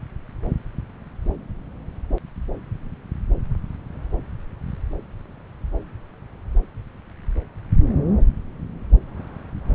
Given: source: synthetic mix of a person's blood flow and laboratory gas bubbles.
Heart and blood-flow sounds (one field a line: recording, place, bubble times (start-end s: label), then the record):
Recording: Doppler ultrasound of blood flow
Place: subclavian vein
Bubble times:
no bubbles
From the record:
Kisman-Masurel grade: 000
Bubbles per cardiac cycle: 0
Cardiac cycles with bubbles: 0%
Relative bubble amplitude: no bubbles discernible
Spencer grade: 0 (complete lack of bubble signals)